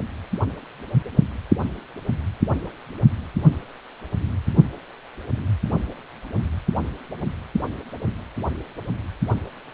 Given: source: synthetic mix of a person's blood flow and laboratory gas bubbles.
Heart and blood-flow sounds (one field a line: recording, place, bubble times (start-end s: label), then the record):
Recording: Doppler ultrasound of blood flow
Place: precordium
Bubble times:
no bubbles
From the record:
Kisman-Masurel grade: 000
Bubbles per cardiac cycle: 0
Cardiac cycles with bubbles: 0%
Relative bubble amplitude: no bubbles discernible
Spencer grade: 0 (complete lack of bubble signals)